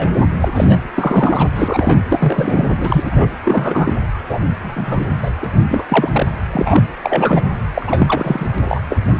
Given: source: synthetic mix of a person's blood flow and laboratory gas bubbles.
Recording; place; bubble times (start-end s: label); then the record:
Doppler ultrasound of blood flow; precordium
0.00-0.08 s: bubbles
0.17-0.25 s: bubbles
0.40-0.48 s: bubbles
0.54-0.80 s: bubbles
0.95-1.48 s: bubbles
1.53-1.96 s: bubbles
2.08-2.67 s: bubbles
2.77-3.27 s: bubbles
3.44-3.96 s: bubbles
4.29-4.40 s: bubbles
4.62-5.08 s: bubbles
5.22-5.30 s: bubbles
5.42-5.47 s: bubbles
5.68-5.83 s: bubbles
5.88-6.08 s: bubbles
6.12-6.26 s: bubbles
6.51-6.83 s: bubbles
7.03-7.42 s: bubbles
7.74-8.49 s: bubbles
8.54-8.58 s: bubbles
8.64-8.79 s: bubbles
8.89-8.98 s: bubbles
From the record:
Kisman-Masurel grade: 243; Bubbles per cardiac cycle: several, 3 to 8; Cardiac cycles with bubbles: 100%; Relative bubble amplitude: loud (0.450 to 0.775); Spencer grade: 3 (all of the cardiac periods contain showers or single bubble signals, but not dominating or overriding the cardiac motion signals); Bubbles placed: anywhere in the cardiac cycle